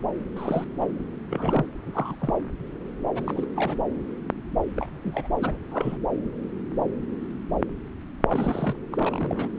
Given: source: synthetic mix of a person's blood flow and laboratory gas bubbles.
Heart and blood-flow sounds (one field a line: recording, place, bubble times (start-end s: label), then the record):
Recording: Doppler ultrasound of blood flow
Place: subclavian vein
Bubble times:
0.36-0.88 s: bubbles
1.30-1.66 s: bubbles
1.86-2.15 s: bubbles
2.21-2.34 s: bubbles
3.15-3.21 s: bubbles
3.25-3.46 s: bubbles
3.55-3.76 s: bubbles
4.77-5.00 s: bubbles
5.04-5.28 s: bubbles
5.40-5.58 s: bubbles
5.71-5.99 s: bubbles
8.28-8.79 s: bubbles
8.92-9.48 s: bubbles
From the record:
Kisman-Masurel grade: 221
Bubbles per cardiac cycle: several, 3 to 8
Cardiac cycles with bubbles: 10 to 50%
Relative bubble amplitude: barely perceptible (0.100 to 0.250)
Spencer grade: 2 (many but less than half of the cardiac periods contain bubble signals, singularly or in groups)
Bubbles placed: anywhere in the cardiac cycle